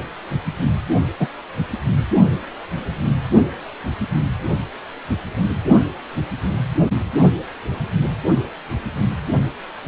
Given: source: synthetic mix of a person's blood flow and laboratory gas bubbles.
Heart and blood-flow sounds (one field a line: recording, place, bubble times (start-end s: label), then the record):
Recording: Doppler ultrasound of blood flow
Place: precordium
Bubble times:
1.19-1.28 s: bubbles
From the record:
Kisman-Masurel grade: 113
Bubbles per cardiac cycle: 1 to 2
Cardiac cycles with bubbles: 1 to 10%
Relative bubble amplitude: loud (0.450 to 0.775)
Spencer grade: 1 (occasional bubble signal discernible with the cardiac motion signal, with majority of cardiac periods free of bubbles)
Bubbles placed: only in the low amplitude regions of the cardiac cycle